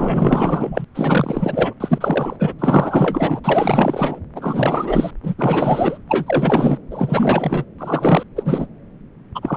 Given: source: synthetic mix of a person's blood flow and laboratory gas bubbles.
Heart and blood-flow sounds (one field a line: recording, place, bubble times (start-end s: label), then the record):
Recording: Doppler ultrasound of blood flow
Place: subclavian vein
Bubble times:
0.00-0.85 s: bubbles
0.94-1.74 s: bubbles
1.80-2.37 s: bubbles
2.39-2.53 s: bubbles
2.58-3.40 s: bubbles
3.44-4.19 s: bubbles
4.35-5.11 s: bubbles
5.22-5.35 s: bubbles
5.38-5.98 s: bubbles
6.08-6.78 s: bubbles
6.90-7.65 s: bubbles
7.78-8.24 s: bubbles
8.36-8.66 s: bubbles
9.35-9.57 s: bubbles
From the record:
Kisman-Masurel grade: 444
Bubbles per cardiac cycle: continuous sound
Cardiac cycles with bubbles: 100%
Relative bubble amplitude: maximal (0.775 to 0.999)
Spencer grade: 4 (maximum detectable bubble signal sounding continuously throughout systole and diastole of every cardiac period, and overriding the amplitude of the normal cardiac signals)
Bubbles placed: anywhere in the cardiac cycle